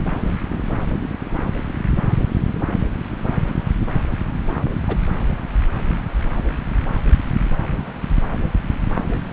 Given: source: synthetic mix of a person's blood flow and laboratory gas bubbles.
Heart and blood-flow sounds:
Doppler ultrasound of blood flow; subclavian vein
4.88-4.96 s: bubbles
From the record:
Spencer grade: 1 (occasional bubble signal discernible with the cardiac motion signal, with majority of cardiac periods free of bubbles); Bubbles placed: anywhere in the cardiac cycle

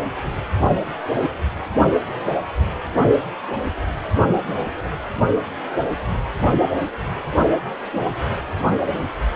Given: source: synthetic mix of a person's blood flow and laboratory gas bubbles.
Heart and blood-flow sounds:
Doppler ultrasound of blood flow; precordium
no bubbles
From the record:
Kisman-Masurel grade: 000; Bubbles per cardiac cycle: 0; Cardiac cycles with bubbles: 0%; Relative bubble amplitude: no bubbles discernible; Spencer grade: 0 (complete lack of bubble signals)

